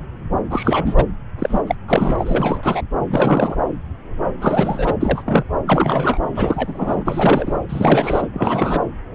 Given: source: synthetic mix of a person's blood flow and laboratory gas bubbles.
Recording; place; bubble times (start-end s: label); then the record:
Doppler ultrasound of blood flow; subclavian vein
0.50-1.05 s: bubbles
1.39-1.62 s: bubbles
1.67-1.75 s: bubbles
1.88-2.81 s: bubbles
3.10-3.56 s: bubbles
4.39-4.94 s: bubbles
5.00-5.43 s: bubbles
5.67-6.18 s: bubbles
6.34-7.58 s: bubbles
7.69-8.27 s: bubbles
8.34-8.80 s: bubbles
From the record:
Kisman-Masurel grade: 333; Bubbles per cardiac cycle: rolling drumbeat, 9 or more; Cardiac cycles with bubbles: 50 to 99%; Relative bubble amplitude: loud (0.450 to 0.775); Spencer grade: 3 (all of the cardiac periods contain showers or single bubble signals, but not dominating or overriding the cardiac motion signals); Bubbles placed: anywhere in the cardiac cycle